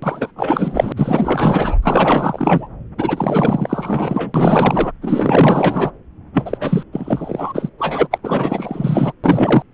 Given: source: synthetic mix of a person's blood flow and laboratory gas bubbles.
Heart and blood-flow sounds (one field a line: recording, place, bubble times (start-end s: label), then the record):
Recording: Doppler ultrasound of blood flow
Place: subclavian vein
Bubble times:
0.02-0.32 s: bubbles
0.36-0.93 s: bubbles
0.97-1.76 s: bubbles
1.82-2.67 s: bubbles
2.97-4.92 s: bubbles
5.01-5.91 s: bubbles
6.33-6.84 s: bubbles
6.92-7.69 s: bubbles
7.79-8.08 s: bubbles
8.11-8.18 s: bubbles
8.23-9.13 s: bubbles
9.23-9.62 s: bubbles
From the record:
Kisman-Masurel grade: 444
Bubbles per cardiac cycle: continuous sound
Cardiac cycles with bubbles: 100%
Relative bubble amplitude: maximal (0.775 to 0.999)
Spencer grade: 4 (maximum detectable bubble signal sounding continuously throughout systole and diastole of every cardiac period, and overriding the amplitude of the normal cardiac signals)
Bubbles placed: anywhere in the cardiac cycle